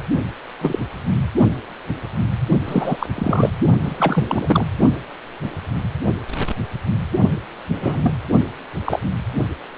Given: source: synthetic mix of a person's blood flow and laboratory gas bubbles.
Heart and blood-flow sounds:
Doppler ultrasound of blood flow; precordium
0.61-0.78 s: bubbles
2.66-3.06 s: bubbles
3.15-3.50 s: bubbles
3.83-4.66 s: bubbles
7.74-8.12 s: bubbles
8.85-8.99 s: bubbles
From the record:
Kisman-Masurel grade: 233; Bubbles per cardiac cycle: several, 3 to 8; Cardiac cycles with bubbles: 50 to 99%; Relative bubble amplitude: loud (0.450 to 0.775); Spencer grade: 3 (all of the cardiac periods contain showers or single bubble signals, but not dominating or overriding the cardiac motion signals); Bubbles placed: only in the low amplitude regions of the cardiac cycle

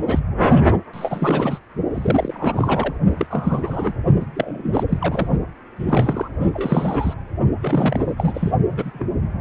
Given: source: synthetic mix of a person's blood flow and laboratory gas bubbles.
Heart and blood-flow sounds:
Doppler ultrasound of blood flow; precordium
0.00-0.19 s: bubbles
0.93-1.59 s: bubbles
1.93-2.95 s: bubbles
3.18-3.27 s: bubbles
3.29-3.94 s: bubbles
4.20-4.26 s: bubbles
4.34-4.83 s: bubbles
4.88-5.28 s: bubbles
5.79-6.28 s: bubbles
6.51-7.13 s: bubbles
7.61-8.52 s: bubbles
8.69-8.91 s: bubbles
8.93-9.07 s: bubbles
From the record:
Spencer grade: 3 (all of the cardiac periods contain showers or single bubble signals, but not dominating or overriding the cardiac motion signals); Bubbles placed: only in the low amplitude regions of the cardiac cycle

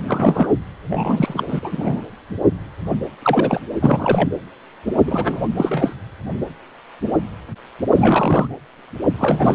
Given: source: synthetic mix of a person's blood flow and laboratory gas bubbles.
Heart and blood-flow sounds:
Doppler ultrasound of blood flow; precordium
0.08-0.52 s: bubbles
0.86-1.44 s: bubbles
1.48-1.60 s: bubbles
1.63-2.06 s: bubbles
3.23-3.60 s: bubbles
3.82-4.29 s: bubbles
5.05-5.47 s: bubbles
5.55-5.96 s: bubbles
7.93-8.47 s: bubbles
9.18-9.55 s: bubbles
From the record:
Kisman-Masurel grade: 233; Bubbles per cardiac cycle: several, 3 to 8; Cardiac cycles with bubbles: 50 to 99%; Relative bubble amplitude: loud (0.450 to 0.775); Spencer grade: 3 (all of the cardiac periods contain showers or single bubble signals, but not dominating or overriding the cardiac motion signals); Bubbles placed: anywhere in the cardiac cycle

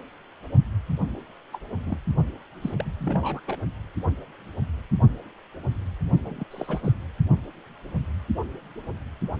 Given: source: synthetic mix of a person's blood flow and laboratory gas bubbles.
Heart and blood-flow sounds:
Doppler ultrasound of blood flow; precordium
1.52-1.58 s: bubbles
1.86-1.97 s: bubbles
2.61-2.92 s: bubbles
2.99-3.40 s: bubbles
3.47-3.57 s: bubbles
6.25-6.45 s: bubbles
6.50-6.92 s: bubbles
From the record:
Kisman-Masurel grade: 221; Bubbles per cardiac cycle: several, 3 to 8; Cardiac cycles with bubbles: 10 to 50%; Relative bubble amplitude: barely perceptible (0.100 to 0.250); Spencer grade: 2 (many but less than half of the cardiac periods contain bubble signals, singularly or in groups); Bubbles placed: only in the low amplitude regions of the cardiac cycle

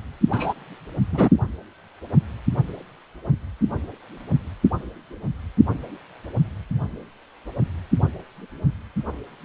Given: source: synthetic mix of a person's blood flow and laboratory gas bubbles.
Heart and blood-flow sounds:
Doppler ultrasound of blood flow; precordium
0.32-0.53 s: bubbles
1.11-1.30 s: bubbles
From the record:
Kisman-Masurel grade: 113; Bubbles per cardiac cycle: 1 to 2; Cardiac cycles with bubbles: 1 to 10%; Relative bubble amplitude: loud (0.450 to 0.775); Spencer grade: 1 (occasional bubble signal discernible with the cardiac motion signal, with majority of cardiac periods free of bubbles); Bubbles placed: only in the low amplitude regions of the cardiac cycle

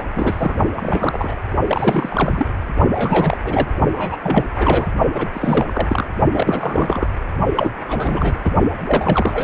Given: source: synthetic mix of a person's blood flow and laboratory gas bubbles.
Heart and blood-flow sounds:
Doppler ultrasound of blood flow; precordium
0.00-0.02 s: bubbles
0.15-0.56 s: bubbles
0.76-1.35 s: bubbles
1.66-2.47 s: bubbles
2.90-3.37 s: bubbles
3.44-3.69 s: bubbles
3.93-4.19 s: bubbles
4.23-4.45 s: bubbles
4.55-4.88 s: bubbles
5.12-5.29 s: bubbles
5.33-6.07 s: bubbles
6.32-7.07 s: bubbles
7.57-7.73 s: bubbles
7.89-8.38 s: bubbles
8.44-8.50 s: bubbles
8.87-9.44 s: bubbles
From the record:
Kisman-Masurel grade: 342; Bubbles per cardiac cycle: rolling drumbeat, 9 or more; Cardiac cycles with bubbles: 100%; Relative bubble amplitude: moderate (0.250 to 0.450); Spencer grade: 3 (all of the cardiac periods contain showers or single bubble signals, but not dominating or overriding the cardiac motion signals); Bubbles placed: only in the low amplitude regions of the cardiac cycle

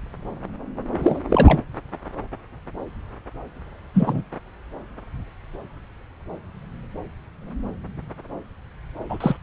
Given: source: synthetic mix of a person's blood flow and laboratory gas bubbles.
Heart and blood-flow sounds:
Doppler ultrasound of blood flow; subclavian vein
1.02-1.20 s: bubbles
1.29-1.62 s: bubbles
3.94-4.23 s: bubbles
9.09-9.37 s: bubbles
From the record:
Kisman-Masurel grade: 222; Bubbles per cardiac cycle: several, 3 to 8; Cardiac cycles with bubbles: 10 to 50%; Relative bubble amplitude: moderate (0.250 to 0.450); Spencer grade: 2 (many but less than half of the cardiac periods contain bubble signals, singularly or in groups); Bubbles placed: anywhere in the cardiac cycle

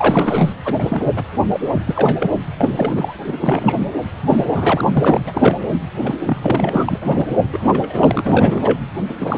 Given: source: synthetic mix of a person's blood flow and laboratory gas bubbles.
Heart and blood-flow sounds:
Doppler ultrasound of blood flow; precordium
0.00-0.53 s: bubbles
0.64-0.74 s: bubbles
0.78-1.13 s: bubbles
1.16-1.23 s: bubbles
1.48-1.81 s: bubbles
1.85-2.31 s: bubbles
2.58-3.13 s: bubbles
3.27-3.38 s: bubbles
3.40-3.86 s: bubbles
4.29-4.46 s: bubbles
4.54-5.21 s: bubbles
5.27-5.57 s: bubbles
5.96-6.15 s: bubbles
6.22-6.70 s: bubbles
6.72-7.28 s: bubbles
7.53-8.79 s: bubbles
9.09-9.17 s: bubbles
9.20-9.38 s: bubbles
From the record:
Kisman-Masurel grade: 342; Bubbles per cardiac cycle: rolling drumbeat, 9 or more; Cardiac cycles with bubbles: 100%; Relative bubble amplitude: moderate (0.250 to 0.450); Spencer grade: 3 (all of the cardiac periods contain showers or single bubble signals, but not dominating or overriding the cardiac motion signals); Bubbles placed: anywhere in the cardiac cycle

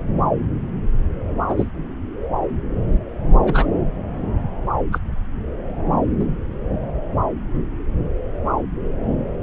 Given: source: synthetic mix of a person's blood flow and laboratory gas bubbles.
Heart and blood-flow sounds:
Doppler ultrasound of blood flow; subclavian vein
1.48-1.69 s: bubbles
3.44-3.67 s: bubbles
4.92-4.99 s: bubbles
6.20-6.25 s: bubbles
From the record:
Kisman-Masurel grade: 123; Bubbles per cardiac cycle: 1 to 2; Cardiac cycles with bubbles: 10 to 50%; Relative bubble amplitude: loud (0.450 to 0.775); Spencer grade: 2 (many but less than half of the cardiac periods contain bubble signals, singularly or in groups); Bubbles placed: anywhere in the cardiac cycle

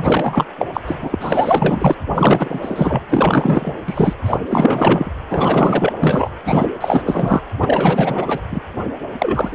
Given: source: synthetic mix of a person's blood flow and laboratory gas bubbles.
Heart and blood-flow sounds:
Doppler ultrasound of blood flow; precordium
0.00-0.45 s: bubbles
0.59-0.67 s: bubbles
0.73-0.81 s: bubbles
0.87-0.96 s: bubbles
1.00-1.19 s: bubbles
1.21-1.95 s: bubbles
2.15-3.02 s: bubbles
3.09-3.73 s: bubbles
3.86-4.14 s: bubbles
4.25-4.40 s: bubbles
4.48-5.11 s: bubbles
5.31-5.93 s: bubbles
6.00-6.30 s: bubbles
6.45-6.71 s: bubbles
6.81-7.02 s: bubbles
7.06-7.41 s: bubbles
7.59-8.41 s: bubbles
8.51-8.60 s: bubbles
9.18-9.55 s: bubbles
From the record:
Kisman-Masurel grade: 444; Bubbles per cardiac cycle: continuous sound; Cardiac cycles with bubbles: 100%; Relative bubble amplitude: maximal (0.775 to 0.999); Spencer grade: 4 (maximum detectable bubble signal sounding continuously throughout systole and diastole of every cardiac period, and overriding the amplitude of the normal cardiac signals); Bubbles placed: anywhere in the cardiac cycle

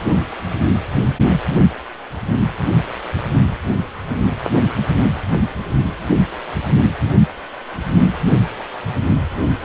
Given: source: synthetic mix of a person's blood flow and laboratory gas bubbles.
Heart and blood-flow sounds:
Doppler ultrasound of blood flow; precordium
1.01-1.07 s: bubbles
1.19-1.40 s: bubbles
From the record:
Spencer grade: 2 (many but less than half of the cardiac periods contain bubble signals, singularly or in groups); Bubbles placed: only in the low amplitude regions of the cardiac cycle

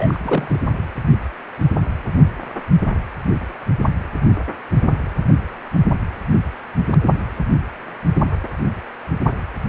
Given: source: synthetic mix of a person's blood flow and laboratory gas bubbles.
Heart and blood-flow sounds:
Doppler ultrasound of blood flow; precordium
0.00-0.59 s: bubbles
0.70-0.84 s: bubbles
From the record:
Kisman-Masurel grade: 211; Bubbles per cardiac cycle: several, 3 to 8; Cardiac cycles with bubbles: 1 to 10%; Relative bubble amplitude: barely perceptible (0.100 to 0.250); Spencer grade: 1 (occasional bubble signal discernible with the cardiac motion signal, with majority of cardiac periods free of bubbles); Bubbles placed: anywhere in the cardiac cycle

